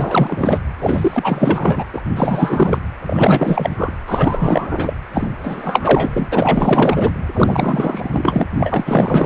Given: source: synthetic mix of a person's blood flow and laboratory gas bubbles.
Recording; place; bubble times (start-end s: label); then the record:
Doppler ultrasound of blood flow; precordium
0.00-0.59 s: bubbles
0.79-1.84 s: bubbles
1.92-2.02 s: bubbles
2.16-2.79 s: bubbles
3.06-3.93 s: bubbles
4.07-4.94 s: bubbles
5.13-5.29 s: bubbles
5.43-6.29 s: bubbles
6.32-7.13 s: bubbles
7.34-8.44 s: bubbles
8.57-9.25 s: bubbles
From the record:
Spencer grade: 4 (maximum detectable bubble signal sounding continuously throughout systole and diastole of every cardiac period, and overriding the amplitude of the normal cardiac signals); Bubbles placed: anywhere in the cardiac cycle